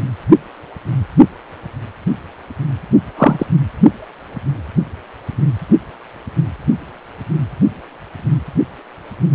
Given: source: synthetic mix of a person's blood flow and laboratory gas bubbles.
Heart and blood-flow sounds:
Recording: Doppler ultrasound of blood flow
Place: precordium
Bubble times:
3.17-3.46 s: bubbles
From the record:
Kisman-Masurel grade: 113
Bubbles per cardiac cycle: 1 to 2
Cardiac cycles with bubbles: 1 to 10%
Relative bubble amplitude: loud (0.450 to 0.775)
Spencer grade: 1 (occasional bubble signal discernible with the cardiac motion signal, with majority of cardiac periods free of bubbles)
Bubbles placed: only in the low amplitude regions of the cardiac cycle

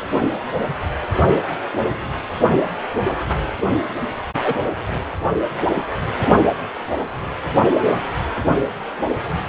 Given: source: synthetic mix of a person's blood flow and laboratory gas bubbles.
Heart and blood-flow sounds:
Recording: Doppler ultrasound of blood flow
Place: precordium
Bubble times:
4.44-4.54 s: bubbles
From the record:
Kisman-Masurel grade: 113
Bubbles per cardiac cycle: 1 to 2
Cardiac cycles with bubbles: 1 to 10%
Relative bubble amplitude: loud (0.450 to 0.775)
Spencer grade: 1 (occasional bubble signal discernible with the cardiac motion signal, with majority of cardiac periods free of bubbles)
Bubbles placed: anywhere in the cardiac cycle

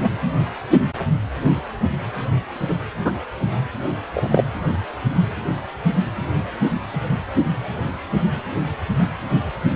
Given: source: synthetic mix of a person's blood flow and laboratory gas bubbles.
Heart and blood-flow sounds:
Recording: Doppler ultrasound of blood flow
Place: precordium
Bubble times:
0.00-0.12 s: bubbles
2.69-2.74 s: bubbles
3.04-3.11 s: bubbles
4.13-4.44 s: bubbles
From the record:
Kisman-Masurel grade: 123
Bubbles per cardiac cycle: 1 to 2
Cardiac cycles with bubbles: 10 to 50%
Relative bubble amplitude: loud (0.450 to 0.775)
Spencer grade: 2 (many but less than half of the cardiac periods contain bubble signals, singularly or in groups)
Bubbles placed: only in the low amplitude regions of the cardiac cycle

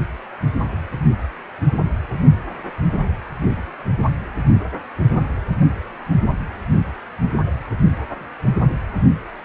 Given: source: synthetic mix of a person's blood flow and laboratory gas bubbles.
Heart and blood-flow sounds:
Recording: Doppler ultrasound of blood flow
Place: precordium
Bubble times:
no bubbles
From the record:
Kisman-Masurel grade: 000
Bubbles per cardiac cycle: 0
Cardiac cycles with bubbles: 0%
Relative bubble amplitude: no bubbles discernible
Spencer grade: 0 (complete lack of bubble signals)

